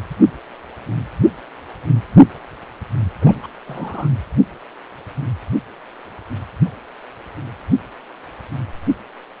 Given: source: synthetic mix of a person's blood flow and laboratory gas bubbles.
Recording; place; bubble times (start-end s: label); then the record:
Doppler ultrasound of blood flow; precordium
3.21-3.47 s: bubbles
3.67-4.08 s: bubbles
From the record:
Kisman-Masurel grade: 211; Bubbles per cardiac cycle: several, 3 to 8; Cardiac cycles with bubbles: 1 to 10%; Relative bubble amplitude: barely perceptible (0.100 to 0.250); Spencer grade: 1 (occasional bubble signal discernible with the cardiac motion signal, with majority of cardiac periods free of bubbles); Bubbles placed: anywhere in the cardiac cycle